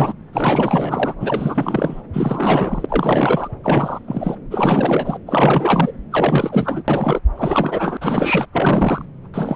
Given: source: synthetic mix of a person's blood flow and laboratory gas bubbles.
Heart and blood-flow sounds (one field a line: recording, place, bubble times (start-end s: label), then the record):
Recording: Doppler ultrasound of blood flow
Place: subclavian vein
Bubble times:
0.00-0.13 s: bubbles
0.33-1.14 s: bubbles
1.20-2.02 s: bubbles
2.13-2.86 s: bubbles
2.88-3.49 s: bubbles
3.63-3.99 s: bubbles
4.08-4.36 s: bubbles
4.51-5.18 s: bubbles
5.26-5.92 s: bubbles
6.12-6.83 s: bubbles
6.88-7.20 s: bubbles
7.35-7.97 s: bubbles
8.01-8.46 s: bubbles
8.53-9.05 s: bubbles
9.34-9.56 s: bubbles
From the record:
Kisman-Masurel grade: 444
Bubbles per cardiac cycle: continuous sound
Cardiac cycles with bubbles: 100%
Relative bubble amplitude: maximal (0.775 to 0.999)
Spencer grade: 4 (maximum detectable bubble signal sounding continuously throughout systole and diastole of every cardiac period, and overriding the amplitude of the normal cardiac signals)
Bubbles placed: anywhere in the cardiac cycle